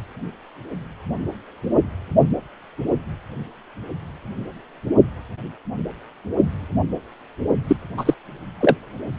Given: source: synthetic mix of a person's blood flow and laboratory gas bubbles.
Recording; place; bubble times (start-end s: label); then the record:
Doppler ultrasound of blood flow; precordium
7.68-7.76 s: bubbles
7.97-8.14 s: bubbles
8.61-8.75 s: bubbles
From the record:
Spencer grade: 1 (occasional bubble signal discernible with the cardiac motion signal, with majority of cardiac periods free of bubbles); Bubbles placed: only in the low amplitude regions of the cardiac cycle